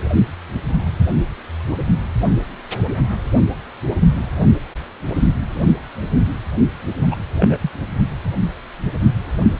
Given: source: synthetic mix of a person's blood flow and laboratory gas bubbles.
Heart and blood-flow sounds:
Doppler ultrasound of blood flow; precordium
7.10-7.15 s: bubbles
7.39-7.58 s: bubbles
7.61-7.71 s: bubbles
From the record:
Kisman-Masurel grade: 213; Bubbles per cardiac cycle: several, 3 to 8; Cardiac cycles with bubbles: 1 to 10%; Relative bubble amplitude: loud (0.450 to 0.775); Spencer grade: 1 (occasional bubble signal discernible with the cardiac motion signal, with majority of cardiac periods free of bubbles); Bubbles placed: only in the low amplitude regions of the cardiac cycle

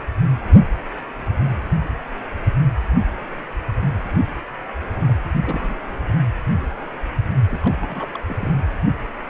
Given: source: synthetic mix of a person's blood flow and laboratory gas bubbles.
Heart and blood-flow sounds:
Doppler ultrasound of blood flow; precordium
5.08-5.16 s: bubbles
5.42-5.74 s: bubbles
7.50-7.74 s: bubbles
7.77-8.23 s: bubbles
8.29-8.51 s: bubbles
From the record:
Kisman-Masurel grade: 221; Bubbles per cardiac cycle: several, 3 to 8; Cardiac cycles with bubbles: 10 to 50%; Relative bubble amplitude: barely perceptible (0.100 to 0.250); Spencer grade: 2 (many but less than half of the cardiac periods contain bubble signals, singularly or in groups); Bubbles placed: anywhere in the cardiac cycle

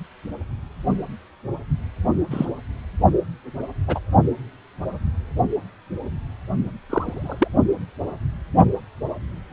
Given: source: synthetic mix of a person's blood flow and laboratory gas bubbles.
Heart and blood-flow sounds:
Doppler ultrasound of blood flow; precordium
2.31-2.46 s: bubbles
3.87-4.00 s: bubbles
6.89-7.47 s: bubbles
From the record:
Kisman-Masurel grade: 122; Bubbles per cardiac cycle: 1 to 2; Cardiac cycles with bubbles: 10 to 50%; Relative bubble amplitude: moderate (0.250 to 0.450); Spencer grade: 2 (many but less than half of the cardiac periods contain bubble signals, singularly or in groups); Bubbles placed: only in the low amplitude regions of the cardiac cycle

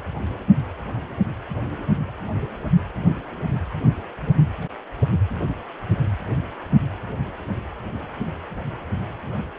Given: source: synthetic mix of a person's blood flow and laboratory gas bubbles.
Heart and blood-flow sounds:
Doppler ultrasound of blood flow; precordium
no bubbles
From the record:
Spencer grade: 0 (complete lack of bubble signals)

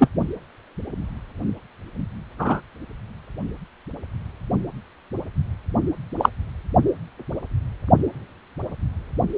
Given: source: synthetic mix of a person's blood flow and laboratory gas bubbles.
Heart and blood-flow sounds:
Doppler ultrasound of blood flow; precordium
0.00-0.08 s: bubbles
2.39-2.60 s: bubbles
6.18-6.29 s: bubbles
From the record:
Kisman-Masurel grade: 123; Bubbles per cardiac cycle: 1 to 2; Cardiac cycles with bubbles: 10 to 50%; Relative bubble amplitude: loud (0.450 to 0.775); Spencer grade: 2 (many but less than half of the cardiac periods contain bubble signals, singularly or in groups); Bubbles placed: only in the low amplitude regions of the cardiac cycle

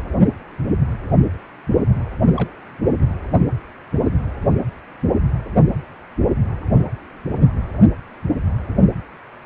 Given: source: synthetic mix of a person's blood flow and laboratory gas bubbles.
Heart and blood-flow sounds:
Doppler ultrasound of blood flow; precordium
2.36-2.50 s: bubbles
From the record:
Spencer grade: 1 (occasional bubble signal discernible with the cardiac motion signal, with majority of cardiac periods free of bubbles); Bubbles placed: anywhere in the cardiac cycle

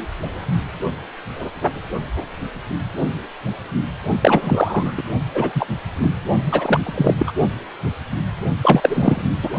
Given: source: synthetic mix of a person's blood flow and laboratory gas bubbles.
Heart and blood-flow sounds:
Doppler ultrasound of blood flow; precordium
4.22-4.92 s: bubbles
4.97-5.03 s: bubbles
5.33-5.67 s: bubbles
6.01-6.11 s: bubbles
6.51-6.80 s: bubbles
6.83-7.14 s: bubbles
7.18-7.32 s: bubbles
8.62-9.22 s: bubbles
9.43-9.50 s: bubbles
From the record:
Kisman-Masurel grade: 223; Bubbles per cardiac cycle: several, 3 to 8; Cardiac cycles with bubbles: 10 to 50%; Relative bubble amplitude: loud (0.450 to 0.775); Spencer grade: 2 (many but less than half of the cardiac periods contain bubble signals, singularly or in groups); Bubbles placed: only in the low amplitude regions of the cardiac cycle

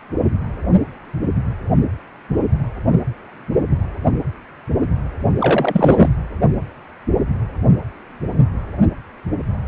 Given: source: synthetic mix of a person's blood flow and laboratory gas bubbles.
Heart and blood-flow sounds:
Doppler ultrasound of blood flow; precordium
5.40-6.09 s: bubbles
From the record:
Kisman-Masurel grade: 213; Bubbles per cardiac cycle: several, 3 to 8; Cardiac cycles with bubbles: 1 to 10%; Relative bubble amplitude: loud (0.450 to 0.775); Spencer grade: 1 (occasional bubble signal discernible with the cardiac motion signal, with majority of cardiac periods free of bubbles); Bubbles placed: only in the low amplitude regions of the cardiac cycle

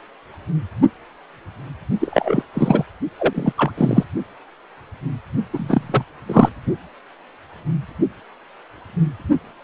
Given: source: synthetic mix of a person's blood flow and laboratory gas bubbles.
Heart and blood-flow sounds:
Doppler ultrasound of blood flow; precordium
2.00-2.43 s: bubbles
2.54-2.84 s: bubbles
3.19-3.52 s: bubbles
3.56-3.71 s: bubbles
3.77-4.04 s: bubbles
5.53-6.05 s: bubbles
6.26-6.49 s: bubbles
From the record:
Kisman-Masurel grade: 223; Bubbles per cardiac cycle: several, 3 to 8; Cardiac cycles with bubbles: 10 to 50%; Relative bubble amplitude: loud (0.450 to 0.775); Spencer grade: 2 (many but less than half of the cardiac periods contain bubble signals, singularly or in groups); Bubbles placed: only in the low amplitude regions of the cardiac cycle

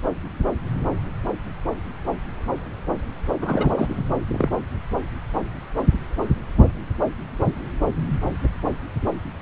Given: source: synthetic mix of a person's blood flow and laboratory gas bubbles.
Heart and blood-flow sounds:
Doppler ultrasound of blood flow; subclavian vein
3.41-4.03 s: bubbles
4.28-4.50 s: bubbles
From the record:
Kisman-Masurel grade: 212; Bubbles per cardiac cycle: several, 3 to 8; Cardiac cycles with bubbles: 1 to 10%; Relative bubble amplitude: moderate (0.250 to 0.450); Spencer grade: 1 (occasional bubble signal discernible with the cardiac motion signal, with majority of cardiac periods free of bubbles); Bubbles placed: anywhere in the cardiac cycle

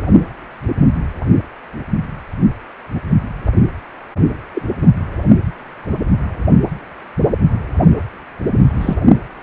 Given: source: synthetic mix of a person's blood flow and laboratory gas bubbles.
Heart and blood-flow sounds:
Doppler ultrasound of blood flow; precordium
4.54-4.62 s: bubbles
4.82-4.88 s: bubbles
8.81-9.00 s: bubbles
From the record:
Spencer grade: 2 (many but less than half of the cardiac periods contain bubble signals, singularly or in groups); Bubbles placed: anywhere in the cardiac cycle

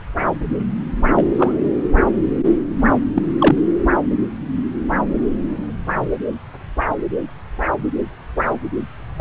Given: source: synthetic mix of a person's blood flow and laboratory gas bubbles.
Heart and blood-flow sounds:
Doppler ultrasound of blood flow; subclavian vein
1.16-1.24 s: bubbles
1.38-1.57 s: bubbles
3.14-3.27 s: bubbles
3.40-3.61 s: bubbles
From the record:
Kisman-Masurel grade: 123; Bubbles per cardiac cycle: 1 to 2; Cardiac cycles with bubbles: 10 to 50%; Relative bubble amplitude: loud (0.450 to 0.775); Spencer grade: 2 (many but less than half of the cardiac periods contain bubble signals, singularly or in groups); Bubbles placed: anywhere in the cardiac cycle

